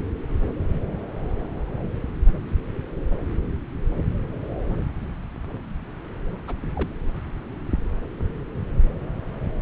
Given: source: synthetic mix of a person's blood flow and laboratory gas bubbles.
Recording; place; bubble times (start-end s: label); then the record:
Doppler ultrasound of blood flow; subclavian vein
6.47-6.54 s: bubbles
6.75-6.94 s: bubbles
From the record:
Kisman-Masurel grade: 111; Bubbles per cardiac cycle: 1 to 2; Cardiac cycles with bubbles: 1 to 10%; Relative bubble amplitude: barely perceptible (0.100 to 0.250); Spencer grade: 1 (occasional bubble signal discernible with the cardiac motion signal, with majority of cardiac periods free of bubbles); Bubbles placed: anywhere in the cardiac cycle